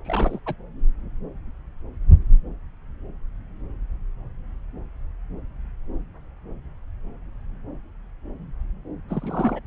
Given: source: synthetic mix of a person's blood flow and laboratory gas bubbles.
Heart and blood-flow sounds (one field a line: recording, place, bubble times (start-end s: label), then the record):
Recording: Doppler ultrasound of blood flow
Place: subclavian vein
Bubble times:
0.05-0.39 s: bubbles
0.46-0.55 s: bubbles
9.09-9.59 s: bubbles
From the record:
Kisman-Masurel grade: 211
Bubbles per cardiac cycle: several, 3 to 8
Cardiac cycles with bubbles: 1 to 10%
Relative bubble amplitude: barely perceptible (0.100 to 0.250)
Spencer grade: 1 (occasional bubble signal discernible with the cardiac motion signal, with majority of cardiac periods free of bubbles)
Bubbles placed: anywhere in the cardiac cycle